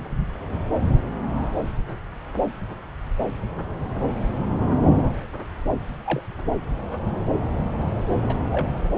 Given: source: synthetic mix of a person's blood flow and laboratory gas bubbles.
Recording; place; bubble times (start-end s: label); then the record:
Doppler ultrasound of blood flow; subclavian vein
6.05-6.21 s: bubbles
8.28-8.36 s: bubbles
8.52-8.68 s: bubbles
From the record:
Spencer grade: 2 (many but less than half of the cardiac periods contain bubble signals, singularly or in groups); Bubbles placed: anywhere in the cardiac cycle